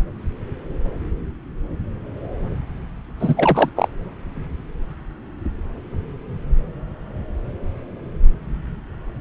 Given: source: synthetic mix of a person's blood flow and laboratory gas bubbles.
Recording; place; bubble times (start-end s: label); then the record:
Doppler ultrasound of blood flow; subclavian vein
3.20-3.69 s: bubbles
3.76-3.88 s: bubbles
From the record:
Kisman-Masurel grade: 213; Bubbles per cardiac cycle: several, 3 to 8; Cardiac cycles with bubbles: 1 to 10%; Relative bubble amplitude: loud (0.450 to 0.775); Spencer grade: 1 (occasional bubble signal discernible with the cardiac motion signal, with majority of cardiac periods free of bubbles); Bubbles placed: anywhere in the cardiac cycle